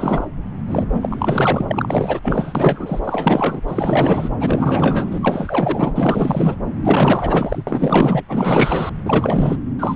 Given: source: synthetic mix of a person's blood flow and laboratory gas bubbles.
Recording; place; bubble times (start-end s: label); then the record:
Doppler ultrasound of blood flow; subclavian vein
0.00-0.27 s: bubbles
0.67-0.86 s: bubbles
0.93-1.65 s: bubbles
1.68-2.19 s: bubbles
2.22-3.00 s: bubbles
3.04-3.61 s: bubbles
3.67-4.29 s: bubbles
4.40-5.18 s: bubbles
5.21-6.55 s: bubbles
6.83-7.63 s: bubbles
7.67-8.23 s: bubbles
8.28-8.90 s: bubbles
9.05-9.62 s: bubbles
9.79-9.96 s: bubbles
From the record:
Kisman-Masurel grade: 444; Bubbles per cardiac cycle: continuous sound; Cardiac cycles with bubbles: 100%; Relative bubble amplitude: maximal (0.775 to 0.999); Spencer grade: 4 (maximum detectable bubble signal sounding continuously throughout systole and diastole of every cardiac period, and overriding the amplitude of the normal cardiac signals); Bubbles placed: anywhere in the cardiac cycle